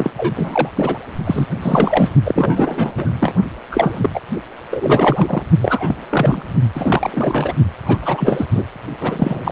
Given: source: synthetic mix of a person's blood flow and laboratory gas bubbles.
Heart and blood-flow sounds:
Doppler ultrasound of blood flow; precordium
0.00-0.11 s: bubbles
0.16-0.69 s: bubbles
0.76-0.98 s: bubbles
1.24-1.46 s: bubbles
1.62-2.09 s: bubbles
2.24-2.93 s: bubbles
2.97-3.13 s: bubbles
3.20-3.34 s: bubbles
3.71-4.10 s: bubbles
4.14-4.21 s: bubbles
4.71-5.43 s: bubbles
5.61-5.96 s: bubbles
6.10-6.42 s: bubbles
6.75-7.54 s: bubbles
7.86-7.98 s: bubbles
8.02-8.47 s: bubbles
8.54-8.66 s: bubbles
9.00-9.52 s: bubbles
From the record:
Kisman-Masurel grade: 343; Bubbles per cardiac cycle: rolling drumbeat, 9 or more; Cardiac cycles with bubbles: 100%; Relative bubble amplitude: loud (0.450 to 0.775); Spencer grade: 3 (all of the cardiac periods contain showers or single bubble signals, but not dominating or overriding the cardiac motion signals); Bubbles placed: only in the low amplitude regions of the cardiac cycle

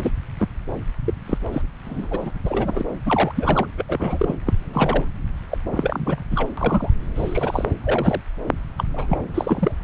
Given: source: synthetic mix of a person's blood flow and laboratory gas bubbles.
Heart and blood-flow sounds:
Doppler ultrasound of blood flow; subclavian vein
0.00-0.11 s: bubbles
0.40-0.48 s: bubbles
1.06-1.14 s: bubbles
1.25-1.38 s: bubbles
1.52-1.62 s: bubbles
1.84-2.08 s: bubbles
2.10-2.32 s: bubbles
2.45-2.85 s: bubbles
3.06-3.33 s: bubbles
3.35-3.67 s: bubbles
3.77-3.84 s: bubbles
3.89-4.35 s: bubbles
4.46-4.54 s: bubbles
4.73-5.04 s: bubbles
5.50-5.58 s: bubbles
5.71-6.23 s: bubbles
6.31-6.49 s: bubbles
6.57-6.90 s: bubbles
7.15-7.64 s: bubbles
7.83-8.21 s: bubbles
8.78-8.84 s: bubbles
8.93-9.06 s: bubbles
9.09-9.19 s: bubbles
9.34-9.72 s: bubbles
From the record:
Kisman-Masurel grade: 242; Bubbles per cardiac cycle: several, 3 to 8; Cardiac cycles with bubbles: 100%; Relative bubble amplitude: moderate (0.250 to 0.450); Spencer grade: 3 (all of the cardiac periods contain showers or single bubble signals, but not dominating or overriding the cardiac motion signals); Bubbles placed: anywhere in the cardiac cycle

